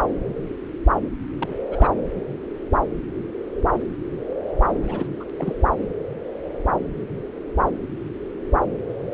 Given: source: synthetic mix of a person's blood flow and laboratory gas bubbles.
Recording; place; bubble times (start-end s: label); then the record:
Doppler ultrasound of blood flow; subclavian vein
1.41-1.55 s: bubbles
1.69-1.90 s: bubbles
4.81-5.07 s: bubbles
5.20-5.24 s: bubbles
5.38-5.55 s: bubbles
From the record:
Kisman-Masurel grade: 221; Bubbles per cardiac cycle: several, 3 to 8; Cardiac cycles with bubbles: 10 to 50%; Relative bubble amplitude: barely perceptible (0.100 to 0.250); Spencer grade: 2 (many but less than half of the cardiac periods contain bubble signals, singularly or in groups); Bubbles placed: anywhere in the cardiac cycle